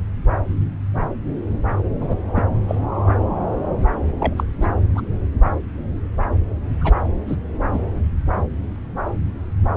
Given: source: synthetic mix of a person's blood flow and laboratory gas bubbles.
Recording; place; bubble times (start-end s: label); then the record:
Doppler ultrasound of blood flow; subclavian vein
2.00-2.15 s: bubbles
2.35-2.43 s: bubbles
2.68-2.75 s: bubbles
4.20-4.33 s: bubbles
4.36-4.43 s: bubbles
4.61-4.67 s: bubbles
4.95-5.01 s: bubbles
6.81-6.95 s: bubbles
7.26-7.36 s: bubbles
7.72-7.79 s: bubbles
From the record:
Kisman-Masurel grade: 222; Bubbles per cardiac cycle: several, 3 to 8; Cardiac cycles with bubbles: 10 to 50%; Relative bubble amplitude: moderate (0.250 to 0.450); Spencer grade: 2 (many but less than half of the cardiac periods contain bubble signals, singularly or in groups); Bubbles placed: anywhere in the cardiac cycle